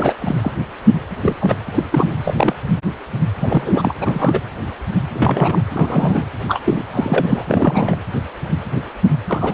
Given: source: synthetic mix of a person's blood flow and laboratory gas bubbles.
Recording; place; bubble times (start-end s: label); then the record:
Doppler ultrasound of blood flow; precordium
0.00-0.14 s: bubbles
0.18-0.53 s: bubbles
1.22-1.37 s: bubbles
1.41-1.56 s: bubbles
1.75-1.83 s: bubbles
1.91-2.16 s: bubbles
2.23-2.56 s: bubbles
3.40-3.94 s: bubbles
4.02-4.39 s: bubbles
5.13-5.62 s: bubbles
5.74-6.29 s: bubbles
6.47-6.82 s: bubbles
6.90-7.45 s: bubbles
7.47-7.97 s: bubbles
9.28-9.54 s: bubbles
From the record:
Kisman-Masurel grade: 232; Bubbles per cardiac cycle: several, 3 to 8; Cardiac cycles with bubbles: 50 to 99%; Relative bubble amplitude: moderate (0.250 to 0.450); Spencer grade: 3 (all of the cardiac periods contain showers or single bubble signals, but not dominating or overriding the cardiac motion signals); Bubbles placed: anywhere in the cardiac cycle